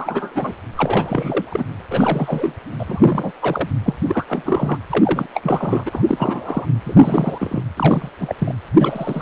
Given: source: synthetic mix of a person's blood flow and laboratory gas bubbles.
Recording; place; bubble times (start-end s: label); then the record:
Doppler ultrasound of blood flow; precordium
0.00-0.53 s: bubbles
0.75-1.65 s: bubbles
1.91-2.55 s: bubbles
2.79-3.33 s: bubbles
3.42-3.69 s: bubbles
3.85-3.94 s: bubbles
4.07-4.25 s: bubbles
4.29-4.77 s: bubbles
4.89-5.26 s: bubbles
5.33-6.04 s: bubbles
6.08-6.66 s: bubbles
6.85-7.63 s: bubbles
7.77-8.08 s: bubbles
8.19-8.36 s: bubbles
8.38-8.55 s: bubbles
8.78-9.22 s: bubbles
From the record:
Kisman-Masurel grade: 343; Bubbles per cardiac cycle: rolling drumbeat, 9 or more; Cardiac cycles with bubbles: 100%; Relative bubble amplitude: loud (0.450 to 0.775); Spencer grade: 3 (all of the cardiac periods contain showers or single bubble signals, but not dominating or overriding the cardiac motion signals); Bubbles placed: anywhere in the cardiac cycle